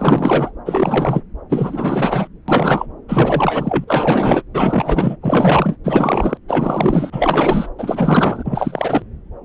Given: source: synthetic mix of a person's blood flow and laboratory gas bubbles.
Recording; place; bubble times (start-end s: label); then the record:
Doppler ultrasound of blood flow; subclavian vein
0.00-0.52 s: bubbles
0.66-1.22 s: bubbles
1.49-2.28 s: bubbles
2.48-2.86 s: bubbles
3.08-3.84 s: bubbles
3.87-4.42 s: bubbles
4.54-5.16 s: bubbles
5.21-5.77 s: bubbles
5.83-6.38 s: bubbles
6.48-7.70 s: bubbles
7.78-9.02 s: bubbles
From the record:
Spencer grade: 4 (maximum detectable bubble signal sounding continuously throughout systole and diastole of every cardiac period, and overriding the amplitude of the normal cardiac signals); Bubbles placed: anywhere in the cardiac cycle